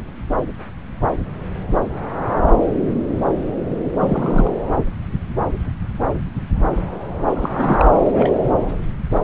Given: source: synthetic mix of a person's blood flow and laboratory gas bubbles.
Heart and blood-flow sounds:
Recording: Doppler ultrasound of blood flow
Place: subclavian vein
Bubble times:
4.01-4.52 s: bubbles
7.35-7.88 s: bubbles
8.04-8.32 s: bubbles
8.42-8.53 s: bubbles
From the record:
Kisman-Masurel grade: 222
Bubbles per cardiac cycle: several, 3 to 8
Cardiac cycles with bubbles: 10 to 50%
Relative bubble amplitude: moderate (0.250 to 0.450)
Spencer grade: 2 (many but less than half of the cardiac periods contain bubble signals, singularly or in groups)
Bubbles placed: anywhere in the cardiac cycle

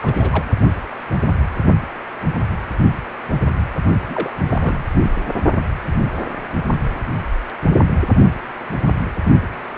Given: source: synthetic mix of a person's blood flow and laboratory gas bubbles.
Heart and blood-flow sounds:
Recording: Doppler ultrasound of blood flow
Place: precordium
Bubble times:
0.02-0.45 s: bubbles
4.07-4.32 s: bubbles
4.48-4.83 s: bubbles
4.99-5.10 s: bubbles
From the record:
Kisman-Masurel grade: 221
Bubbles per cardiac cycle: several, 3 to 8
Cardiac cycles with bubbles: 10 to 50%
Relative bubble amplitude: barely perceptible (0.100 to 0.250)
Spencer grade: 2 (many but less than half of the cardiac periods contain bubble signals, singularly or in groups)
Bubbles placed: only in the low amplitude regions of the cardiac cycle

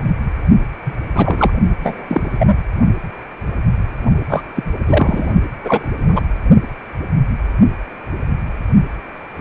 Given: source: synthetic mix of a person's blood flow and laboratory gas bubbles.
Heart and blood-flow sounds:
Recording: Doppler ultrasound of blood flow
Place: precordium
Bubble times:
0.84-0.93 s: bubbles
1.15-1.50 s: bubbles
1.83-2.05 s: bubbles
2.08-2.55 s: bubbles
4.29-4.45 s: bubbles
4.55-4.63 s: bubbles
4.87-5.33 s: bubbles
5.64-5.89 s: bubbles
6.00-6.21 s: bubbles
From the record:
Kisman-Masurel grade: 223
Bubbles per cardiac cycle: several, 3 to 8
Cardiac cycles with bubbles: 10 to 50%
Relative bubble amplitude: loud (0.450 to 0.775)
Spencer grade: 2 (many but less than half of the cardiac periods contain bubble signals, singularly or in groups)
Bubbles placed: only in the low amplitude regions of the cardiac cycle

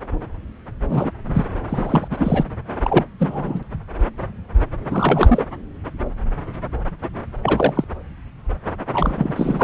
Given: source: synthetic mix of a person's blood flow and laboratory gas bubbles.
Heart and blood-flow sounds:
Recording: Doppler ultrasound of blood flow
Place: subclavian vein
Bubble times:
0.89-1.11 s: bubbles
1.34-1.45 s: bubbles
1.68-2.08 s: bubbles
2.11-2.44 s: bubbles
2.83-3.05 s: bubbles
3.19-3.63 s: bubbles
4.90-5.45 s: bubbles
7.42-7.84 s: bubbles
8.91-9.64 s: bubbles
From the record:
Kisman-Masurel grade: 233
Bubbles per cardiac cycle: several, 3 to 8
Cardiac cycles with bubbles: 50 to 99%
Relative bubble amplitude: loud (0.450 to 0.775)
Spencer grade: 3 (all of the cardiac periods contain showers or single bubble signals, but not dominating or overriding the cardiac motion signals)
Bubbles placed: anywhere in the cardiac cycle

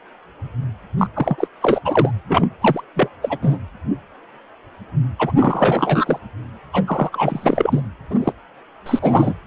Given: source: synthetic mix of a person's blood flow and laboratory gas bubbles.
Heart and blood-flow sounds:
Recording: Doppler ultrasound of blood flow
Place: precordium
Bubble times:
0.97-1.07 s: bubbles
1.16-1.47 s: bubbles
1.62-1.80 s: bubbles
1.84-2.11 s: bubbles
2.28-2.48 s: bubbles
2.61-2.81 s: bubbles
2.96-3.08 s: bubbles
3.22-3.39 s: bubbles
3.42-3.58 s: bubbles
5.18-5.32 s: bubbles
5.36-6.18 s: bubbles
6.72-6.84 s: bubbles
6.87-7.09 s: bubbles
7.12-7.81 s: bubbles
8.10-8.32 s: bubbles
8.86-9.33 s: bubbles
From the record:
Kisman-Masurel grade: 333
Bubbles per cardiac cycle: rolling drumbeat, 9 or more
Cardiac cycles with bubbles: 50 to 99%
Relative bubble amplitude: loud (0.450 to 0.775)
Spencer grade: 3 (all of the cardiac periods contain showers or single bubble signals, but not dominating or overriding the cardiac motion signals)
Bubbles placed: anywhere in the cardiac cycle

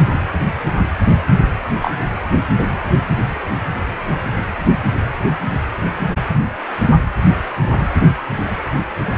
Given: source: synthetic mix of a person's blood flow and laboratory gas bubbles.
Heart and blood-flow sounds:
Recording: Doppler ultrasound of blood flow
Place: precordium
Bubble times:
1.82-1.93 s: bubbles
From the record:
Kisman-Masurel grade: 113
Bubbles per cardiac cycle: 1 to 2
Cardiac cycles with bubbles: 1 to 10%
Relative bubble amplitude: loud (0.450 to 0.775)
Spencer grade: 1 (occasional bubble signal discernible with the cardiac motion signal, with majority of cardiac periods free of bubbles)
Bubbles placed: anywhere in the cardiac cycle

